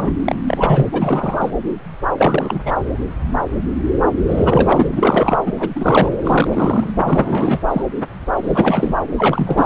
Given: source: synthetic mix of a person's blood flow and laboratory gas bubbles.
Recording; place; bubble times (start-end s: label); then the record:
Doppler ultrasound of blood flow; subclavian vein
0.00-0.11 s: bubbles
0.24-0.35 s: bubbles
0.46-0.89 s: bubbles
0.92-1.52 s: bubbles
2.17-2.60 s: bubbles
2.65-2.73 s: bubbles
4.26-4.89 s: bubbles
4.92-5.51 s: bubbles
5.55-5.68 s: bubbles
5.75-6.09 s: bubbles
6.24-6.92 s: bubbles
7.04-7.83 s: bubbles
8.44-8.95 s: bubbles
9.17-9.66 s: bubbles
From the record:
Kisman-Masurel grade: 333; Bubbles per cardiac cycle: rolling drumbeat, 9 or more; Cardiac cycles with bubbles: 50 to 99%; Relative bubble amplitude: loud (0.450 to 0.775); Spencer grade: 3 (all of the cardiac periods contain showers or single bubble signals, but not dominating or overriding the cardiac motion signals); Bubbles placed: anywhere in the cardiac cycle